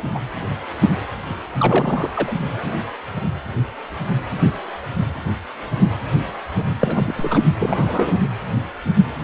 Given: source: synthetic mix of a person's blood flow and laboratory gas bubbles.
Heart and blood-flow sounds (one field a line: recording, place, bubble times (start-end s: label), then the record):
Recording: Doppler ultrasound of blood flow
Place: precordium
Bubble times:
0.00-0.03 s: bubbles
0.15-0.19 s: bubbles
1.59-2.32 s: bubbles
6.80-7.41 s: bubbles
7.60-8.19 s: bubbles
From the record:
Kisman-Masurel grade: 332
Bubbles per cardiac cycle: rolling drumbeat, 9 or more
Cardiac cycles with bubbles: 50 to 99%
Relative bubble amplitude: moderate (0.250 to 0.450)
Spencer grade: 3 (all of the cardiac periods contain showers or single bubble signals, but not dominating or overriding the cardiac motion signals)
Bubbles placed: anywhere in the cardiac cycle